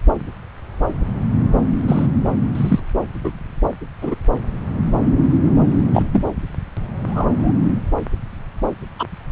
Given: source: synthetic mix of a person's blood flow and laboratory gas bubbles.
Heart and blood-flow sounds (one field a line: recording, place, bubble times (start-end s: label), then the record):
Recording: Doppler ultrasound of blood flow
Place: subclavian vein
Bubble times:
1.87-2.07 s: bubbles
2.55-2.79 s: bubbles
3.24-3.31 s: bubbles
4.01-4.15 s: bubbles
5.94-6.03 s: bubbles
6.12-6.25 s: bubbles
7.08-7.52 s: bubbles
8.98-9.06 s: bubbles
From the record:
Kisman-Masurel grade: 123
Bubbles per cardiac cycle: 1 to 2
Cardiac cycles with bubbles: 10 to 50%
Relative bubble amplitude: loud (0.450 to 0.775)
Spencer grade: 2 (many but less than half of the cardiac periods contain bubble signals, singularly or in groups)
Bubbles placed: anywhere in the cardiac cycle